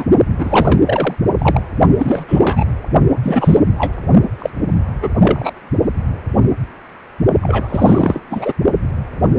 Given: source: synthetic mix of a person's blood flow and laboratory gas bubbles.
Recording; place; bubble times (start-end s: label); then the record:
Doppler ultrasound of blood flow; precordium
0.00-0.04 s: bubbles
0.39-0.80 s: bubbles
0.85-1.15 s: bubbles
1.38-1.62 s: bubbles
1.97-2.25 s: bubbles
2.28-2.65 s: bubbles
3.22-3.60 s: bubbles
3.78-3.93 s: bubbles
4.38-4.50 s: bubbles
5.02-5.08 s: bubbles
5.20-5.53 s: bubbles
7.42-8.21 s: bubbles
8.30-8.53 s: bubbles
From the record:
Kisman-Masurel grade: 233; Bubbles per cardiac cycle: several, 3 to 8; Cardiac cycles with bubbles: 50 to 99%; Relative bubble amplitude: loud (0.450 to 0.775); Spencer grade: 3 (all of the cardiac periods contain showers or single bubble signals, but not dominating or overriding the cardiac motion signals); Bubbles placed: only in the low amplitude regions of the cardiac cycle